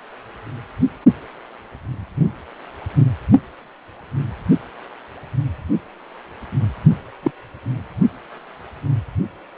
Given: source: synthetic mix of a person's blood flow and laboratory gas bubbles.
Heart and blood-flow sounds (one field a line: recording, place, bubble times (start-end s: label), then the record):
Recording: Doppler ultrasound of blood flow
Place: precordium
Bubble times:
7.23-7.31 s: bubbles
From the record:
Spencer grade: 2 (many but less than half of the cardiac periods contain bubble signals, singularly or in groups)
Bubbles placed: only in the low amplitude regions of the cardiac cycle